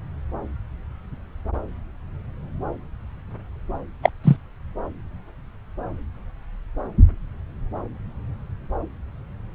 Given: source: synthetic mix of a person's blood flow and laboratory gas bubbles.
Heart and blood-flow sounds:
Doppler ultrasound of blood flow; subclavian vein
4.02-4.10 s: bubbles
4.23-4.36 s: bubbles
From the record:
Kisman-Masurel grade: 113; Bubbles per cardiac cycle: 1 to 2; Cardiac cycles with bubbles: 1 to 10%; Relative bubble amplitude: loud (0.450 to 0.775); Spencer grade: 1 (occasional bubble signal discernible with the cardiac motion signal, with majority of cardiac periods free of bubbles); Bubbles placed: anywhere in the cardiac cycle

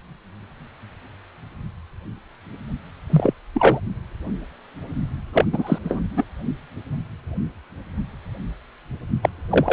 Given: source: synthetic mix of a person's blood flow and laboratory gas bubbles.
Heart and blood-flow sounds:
Doppler ultrasound of blood flow; precordium
3.10-3.33 s: bubbles
3.54-3.80 s: bubbles
5.33-5.45 s: bubbles
5.52-5.79 s: bubbles
5.83-6.00 s: bubbles
6.16-6.24 s: bubbles
9.22-9.29 s: bubbles
9.49-9.73 s: bubbles
From the record:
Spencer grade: 2 (many but less than half of the cardiac periods contain bubble signals, singularly or in groups); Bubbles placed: only in the low amplitude regions of the cardiac cycle

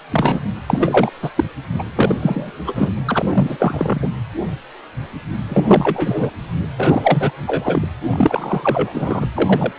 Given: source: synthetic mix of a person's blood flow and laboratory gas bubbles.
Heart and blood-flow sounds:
Doppler ultrasound of blood flow; precordium
0.11-0.40 s: bubbles
0.66-1.10 s: bubbles
1.22-1.30 s: bubbles
1.35-1.44 s: bubbles
1.79-1.83 s: bubbles
1.96-2.16 s: bubbles
2.22-2.52 s: bubbles
2.67-2.93 s: bubbles
3.06-4.08 s: bubbles
5.49-6.30 s: bubbles
6.77-7.31 s: bubbles
7.46-7.87 s: bubbles
8.04-9.27 s: bubbles
9.35-9.71 s: bubbles
From the record:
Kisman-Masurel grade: 333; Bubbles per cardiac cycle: rolling drumbeat, 9 or more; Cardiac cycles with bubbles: 50 to 99%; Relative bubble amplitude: loud (0.450 to 0.775); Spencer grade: 3 (all of the cardiac periods contain showers or single bubble signals, but not dominating or overriding the cardiac motion signals); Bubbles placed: anywhere in the cardiac cycle

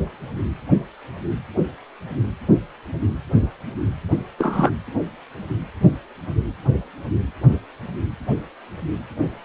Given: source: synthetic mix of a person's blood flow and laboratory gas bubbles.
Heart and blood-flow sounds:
Doppler ultrasound of blood flow; precordium
4.38-4.70 s: bubbles
From the record:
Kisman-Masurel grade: 112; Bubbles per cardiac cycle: 1 to 2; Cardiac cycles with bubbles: 1 to 10%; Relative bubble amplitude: moderate (0.250 to 0.450); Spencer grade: 1 (occasional bubble signal discernible with the cardiac motion signal, with majority of cardiac periods free of bubbles); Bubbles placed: anywhere in the cardiac cycle

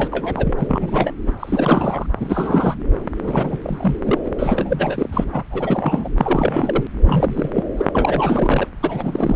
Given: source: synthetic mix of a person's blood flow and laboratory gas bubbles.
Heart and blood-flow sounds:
Doppler ultrasound of blood flow; subclavian vein
0.00-0.54 s: bubbles
0.58-1.13 s: bubbles
1.26-1.32 s: bubbles
1.40-2.06 s: bubbles
2.19-2.75 s: bubbles
3.21-3.57 s: bubbles
3.62-3.96 s: bubbles
4.04-4.21 s: bubbles
4.25-4.31 s: bubbles
4.39-5.25 s: bubbles
5.32-5.44 s: bubbles
5.50-6.12 s: bubbles
6.19-6.83 s: bubbles
7.04-7.50 s: bubbles
7.54-7.63 s: bubbles
7.77-7.85 s: bubbles
7.94-8.67 s: bubbles
8.80-9.36 s: bubbles
From the record:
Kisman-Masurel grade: 342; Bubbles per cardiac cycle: rolling drumbeat, 9 or more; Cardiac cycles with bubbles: 100%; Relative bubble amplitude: moderate (0.250 to 0.450); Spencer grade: 3 (all of the cardiac periods contain showers or single bubble signals, but not dominating or overriding the cardiac motion signals); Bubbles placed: anywhere in the cardiac cycle

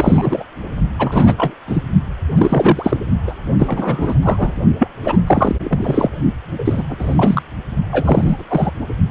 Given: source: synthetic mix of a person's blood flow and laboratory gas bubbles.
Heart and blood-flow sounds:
Doppler ultrasound of blood flow; precordium
0.00-0.44 s: bubbles
0.98-1.35 s: bubbles
1.37-1.54 s: bubbles
1.67-1.82 s: bubbles
2.36-2.97 s: bubbles
3.27-3.35 s: bubbles
3.58-4.15 s: bubbles
4.22-4.61 s: bubbles
4.79-4.88 s: bubbles
5.04-5.17 s: bubbles
5.26-5.55 s: bubbles
5.63-6.11 s: bubbles
6.58-6.83 s: bubbles
6.89-7.42 s: bubbles
7.92-8.45 s: bubbles
8.48-8.71 s: bubbles
From the record:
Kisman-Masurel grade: 343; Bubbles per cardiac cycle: rolling drumbeat, 9 or more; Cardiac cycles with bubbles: 100%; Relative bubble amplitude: loud (0.450 to 0.775); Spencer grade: 3 (all of the cardiac periods contain showers or single bubble signals, but not dominating or overriding the cardiac motion signals); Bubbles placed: only in the low amplitude regions of the cardiac cycle

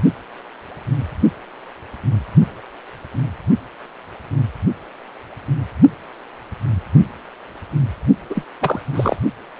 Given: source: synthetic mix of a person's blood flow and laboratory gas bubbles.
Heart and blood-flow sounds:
Doppler ultrasound of blood flow; precordium
8.29-8.45 s: bubbles
8.61-8.80 s: bubbles
8.94-9.16 s: bubbles
From the record:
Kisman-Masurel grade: 212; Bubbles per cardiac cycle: several, 3 to 8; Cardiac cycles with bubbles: 1 to 10%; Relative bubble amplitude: moderate (0.250 to 0.450); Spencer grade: 1 (occasional bubble signal discernible with the cardiac motion signal, with majority of cardiac periods free of bubbles); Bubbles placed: only in the low amplitude regions of the cardiac cycle

